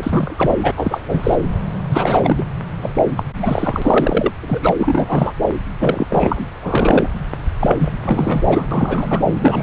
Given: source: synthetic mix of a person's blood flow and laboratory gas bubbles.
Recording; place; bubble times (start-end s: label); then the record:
Doppler ultrasound of blood flow; subclavian vein
0.00-0.56 s: bubbles
0.62-0.71 s: bubbles
0.77-1.02 s: bubbles
1.06-1.36 s: bubbles
1.89-2.44 s: bubbles
2.81-2.91 s: bubbles
2.96-3.04 s: bubbles
3.17-3.23 s: bubbles
3.42-4.32 s: bubbles
4.42-4.76 s: bubbles
4.80-5.33 s: bubbles
5.80-6.06 s: bubbles
6.09-6.46 s: bubbles
6.53-7.09 s: bubbles
7.59-7.76 s: bubbles
7.79-7.91 s: bubbles
8.00-8.66 s: bubbles
8.71-9.21 s: bubbles
9.41-9.63 s: bubbles
From the record:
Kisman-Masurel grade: 343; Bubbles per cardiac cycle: rolling drumbeat, 9 or more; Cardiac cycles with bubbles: 100%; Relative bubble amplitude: loud (0.450 to 0.775); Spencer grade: 3 (all of the cardiac periods contain showers or single bubble signals, but not dominating or overriding the cardiac motion signals); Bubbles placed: anywhere in the cardiac cycle